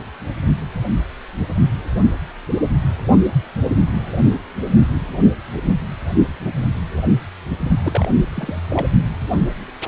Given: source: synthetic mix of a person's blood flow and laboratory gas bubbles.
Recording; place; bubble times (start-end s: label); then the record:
Doppler ultrasound of blood flow; precordium
7.83-8.08 s: bubbles
8.35-8.61 s: bubbles
8.69-8.87 s: bubbles
From the record:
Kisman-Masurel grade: 221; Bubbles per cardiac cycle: several, 3 to 8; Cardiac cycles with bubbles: 10 to 50%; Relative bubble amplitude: barely perceptible (0.100 to 0.250); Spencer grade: 2 (many but less than half of the cardiac periods contain bubble signals, singularly or in groups); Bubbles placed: only in the low amplitude regions of the cardiac cycle